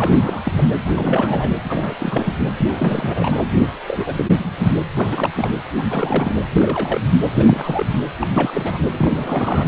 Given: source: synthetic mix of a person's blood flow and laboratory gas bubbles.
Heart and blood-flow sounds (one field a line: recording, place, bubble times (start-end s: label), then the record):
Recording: Doppler ultrasound of blood flow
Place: precordium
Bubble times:
0.00-0.41 s: bubbles
0.44-0.52 s: bubbles
0.56-0.65 s: bubbles
0.85-1.56 s: bubbles
1.64-2.38 s: bubbles
2.56-3.43 s: bubbles
3.88-4.25 s: bubbles
4.36-4.67 s: bubbles
4.95-5.29 s: bubbles
5.35-5.50 s: bubbles
5.78-5.82 s: bubbles
5.88-6.45 s: bubbles
6.50-7.01 s: bubbles
7.33-7.86 s: bubbles
8.20-8.27 s: bubbles
8.34-8.82 s: bubbles
8.94-9.68 s: bubbles
From the record:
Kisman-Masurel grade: 342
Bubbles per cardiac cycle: rolling drumbeat, 9 or more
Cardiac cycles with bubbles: 100%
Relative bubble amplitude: moderate (0.250 to 0.450)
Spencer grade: 3 (all of the cardiac periods contain showers or single bubble signals, but not dominating or overriding the cardiac motion signals)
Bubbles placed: anywhere in the cardiac cycle